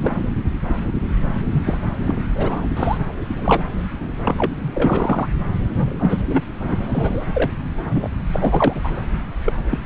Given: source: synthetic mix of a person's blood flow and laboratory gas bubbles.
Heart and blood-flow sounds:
Doppler ultrasound of blood flow; subclavian vein
0.00-0.25 s: bubbles
1.52-1.62 s: bubbles
1.66-1.77 s: bubbles
2.07-2.23 s: bubbles
2.35-2.67 s: bubbles
2.77-2.98 s: bubbles
3.35-3.69 s: bubbles
4.21-4.51 s: bubbles
4.62-4.71 s: bubbles
4.74-5.28 s: bubbles
5.65-6.21 s: bubbles
6.26-6.41 s: bubbles
6.67-7.25 s: bubbles
7.34-7.52 s: bubbles
7.89-8.09 s: bubbles
8.33-8.81 s: bubbles
8.84-9.00 s: bubbles
9.45-9.53 s: bubbles
9.70-9.78 s: bubbles
From the record:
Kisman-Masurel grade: 232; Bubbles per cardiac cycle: several, 3 to 8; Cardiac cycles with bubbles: 50 to 99%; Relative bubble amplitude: moderate (0.250 to 0.450); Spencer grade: 3 (all of the cardiac periods contain showers or single bubble signals, but not dominating or overriding the cardiac motion signals); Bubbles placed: anywhere in the cardiac cycle

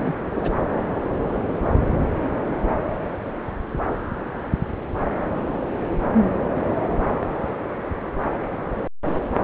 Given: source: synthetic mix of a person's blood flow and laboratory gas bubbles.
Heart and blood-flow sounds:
Doppler ultrasound of blood flow; subclavian vein
0.00-0.21 s: bubbles
0.35-0.54 s: bubbles
From the record:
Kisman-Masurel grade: 211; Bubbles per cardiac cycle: several, 3 to 8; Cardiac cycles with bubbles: 1 to 10%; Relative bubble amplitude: barely perceptible (0.100 to 0.250); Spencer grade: 1 (occasional bubble signal discernible with the cardiac motion signal, with majority of cardiac periods free of bubbles); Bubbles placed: anywhere in the cardiac cycle

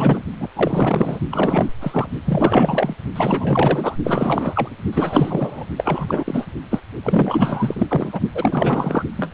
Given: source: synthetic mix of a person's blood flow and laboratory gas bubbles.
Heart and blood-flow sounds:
Doppler ultrasound of blood flow; precordium
0.00-0.23 s: bubbles
0.40-0.49 s: bubbles
0.55-1.20 s: bubbles
1.31-1.71 s: bubbles
1.81-2.08 s: bubbles
2.25-2.94 s: bubbles
3.16-3.96 s: bubbles
4.04-4.70 s: bubbles
4.92-5.66 s: bubbles
5.77-6.47 s: bubbles
6.70-6.81 s: bubbles
7.03-8.20 s: bubbles
8.34-9.04 s: bubbles
9.17-9.31 s: bubbles
From the record:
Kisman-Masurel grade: 444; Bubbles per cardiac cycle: continuous sound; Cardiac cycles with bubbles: 100%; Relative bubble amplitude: maximal (0.775 to 0.999); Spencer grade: 4 (maximum detectable bubble signal sounding continuously throughout systole and diastole of every cardiac period, and overriding the amplitude of the normal cardiac signals); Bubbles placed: only in the low amplitude regions of the cardiac cycle

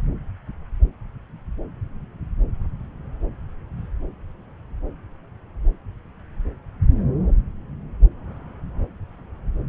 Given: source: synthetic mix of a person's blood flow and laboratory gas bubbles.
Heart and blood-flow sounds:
Doppler ultrasound of blood flow; subclavian vein
no bubbles
From the record:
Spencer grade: 0 (complete lack of bubble signals)

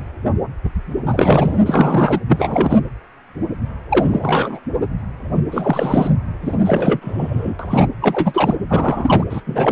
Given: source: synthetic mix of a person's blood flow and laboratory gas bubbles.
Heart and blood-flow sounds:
Doppler ultrasound of blood flow; precordium
1.05-1.61 s: bubbles
1.66-2.20 s: bubbles
2.29-2.79 s: bubbles
3.89-4.59 s: bubbles
5.51-6.11 s: bubbles
6.42-6.60 s: bubbles
6.64-7.55 s: bubbles
7.59-7.87 s: bubbles
8.01-8.55 s: bubbles
8.69-9.23 s: bubbles
9.30-9.41 s: bubbles
9.46-9.72 s: bubbles
From the record:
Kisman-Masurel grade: 333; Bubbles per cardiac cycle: rolling drumbeat, 9 or more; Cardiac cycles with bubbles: 50 to 99%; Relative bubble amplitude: loud (0.450 to 0.775); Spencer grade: 3 (all of the cardiac periods contain showers or single bubble signals, but not dominating or overriding the cardiac motion signals); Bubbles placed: anywhere in the cardiac cycle

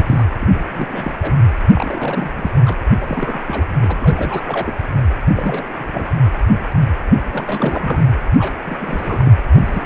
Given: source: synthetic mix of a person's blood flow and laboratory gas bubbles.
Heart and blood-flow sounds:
Doppler ultrasound of blood flow; precordium
0.00-0.25 s: bubbles
0.41-0.48 s: bubbles
0.54-0.61 s: bubbles
0.68-1.18 s: bubbles
1.21-1.34 s: bubbles
1.75-2.31 s: bubbles
2.37-2.51 s: bubbles
2.65-2.79 s: bubbles
2.81-2.85 s: bubbles
3.00-3.65 s: bubbles
3.80-4.76 s: bubbles
5.34-5.67 s: bubbles
5.77-6.07 s: bubbles
7.28-8.03 s: bubbles
8.38-8.54 s: bubbles
8.66-9.33 s: bubbles
9.52-9.86 s: bubbles
From the record:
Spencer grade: 3 (all of the cardiac periods contain showers or single bubble signals, but not dominating or overriding the cardiac motion signals); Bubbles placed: anywhere in the cardiac cycle

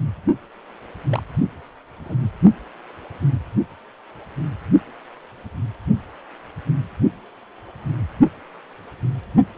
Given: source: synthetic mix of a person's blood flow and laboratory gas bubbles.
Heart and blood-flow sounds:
Doppler ultrasound of blood flow; precordium
1.09-1.22 s: bubbles
2.04-2.15 s: bubbles
From the record:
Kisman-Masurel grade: 111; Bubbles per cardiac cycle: 1 to 2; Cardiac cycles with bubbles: 1 to 10%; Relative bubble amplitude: barely perceptible (0.100 to 0.250); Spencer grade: 1 (occasional bubble signal discernible with the cardiac motion signal, with majority of cardiac periods free of bubbles); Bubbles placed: only in the low amplitude regions of the cardiac cycle

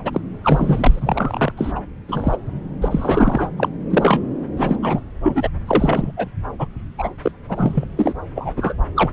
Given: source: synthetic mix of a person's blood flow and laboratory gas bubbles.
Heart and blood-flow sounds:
Doppler ultrasound of blood flow; subclavian vein
0.04-0.21 s: bubbles
0.44-1.53 s: bubbles
1.57-1.72 s: bubbles
1.75-1.80 s: bubbles
2.08-2.37 s: bubbles
2.81-3.49 s: bubbles
3.57-3.69 s: bubbles
3.90-4.21 s: bubbles
4.57-4.79 s: bubbles
4.82-5.01 s: bubbles
5.23-5.50 s: bubbles
5.67-6.12 s: bubbles
6.17-6.28 s: bubbles
6.58-6.67 s: bubbles
6.98-7.09 s: bubbles
7.22-7.32 s: bubbles
7.49-7.85 s: bubbles
7.96-8.13 s: bubbles
8.36-8.53 s: bubbles
8.56-8.75 s: bubbles
8.96-9.13 s: bubbles
From the record:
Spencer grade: 3 (all of the cardiac periods contain showers or single bubble signals, but not dominating or overriding the cardiac motion signals); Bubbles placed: anywhere in the cardiac cycle

